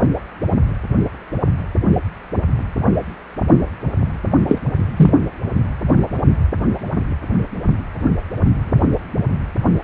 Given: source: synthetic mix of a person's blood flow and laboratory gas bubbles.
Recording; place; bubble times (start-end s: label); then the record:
Doppler ultrasound of blood flow; precordium
4.48-4.59 s: bubbles
4.96-5.11 s: bubbles
From the record:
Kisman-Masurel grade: 113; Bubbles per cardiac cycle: 1 to 2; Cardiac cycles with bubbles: 1 to 10%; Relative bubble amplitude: loud (0.450 to 0.775); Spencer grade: 1 (occasional bubble signal discernible with the cardiac motion signal, with majority of cardiac periods free of bubbles); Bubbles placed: anywhere in the cardiac cycle